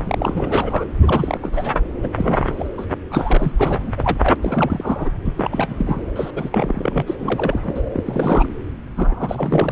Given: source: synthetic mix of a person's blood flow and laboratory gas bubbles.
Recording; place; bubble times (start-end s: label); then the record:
Doppler ultrasound of blood flow; subclavian vein
0.00-0.84 s: bubbles
1.01-1.72 s: bubbles
2.02-2.09 s: bubbles
2.16-2.70 s: bubbles
2.77-2.85 s: bubbles
3.10-3.52 s: bubbles
3.58-3.93 s: bubbles
3.98-4.36 s: bubbles
4.42-5.10 s: bubbles
5.25-5.33 s: bubbles
5.37-6.02 s: bubbles
6.16-6.31 s: bubbles
6.35-6.49 s: bubbles
6.52-7.02 s: bubbles
7.07-7.15 s: bubbles
7.19-7.80 s: bubbles
7.92-8.49 s: bubbles
8.96-9.72 s: bubbles
From the record:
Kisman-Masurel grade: 342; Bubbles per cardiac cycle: rolling drumbeat, 9 or more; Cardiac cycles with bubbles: 100%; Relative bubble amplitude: moderate (0.250 to 0.450); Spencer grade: 3 (all of the cardiac periods contain showers or single bubble signals, but not dominating or overriding the cardiac motion signals); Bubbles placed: anywhere in the cardiac cycle